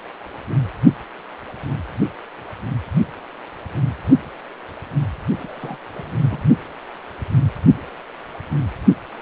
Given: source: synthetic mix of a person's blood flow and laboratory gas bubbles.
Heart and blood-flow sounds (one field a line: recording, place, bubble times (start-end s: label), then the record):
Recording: Doppler ultrasound of blood flow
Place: precordium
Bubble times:
5.35-5.79 s: bubbles
5.94-6.44 s: bubbles
From the record:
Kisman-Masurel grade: 211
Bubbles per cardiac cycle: several, 3 to 8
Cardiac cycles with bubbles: 1 to 10%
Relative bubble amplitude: barely perceptible (0.100 to 0.250)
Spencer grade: 1 (occasional bubble signal discernible with the cardiac motion signal, with majority of cardiac periods free of bubbles)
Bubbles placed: only in the low amplitude regions of the cardiac cycle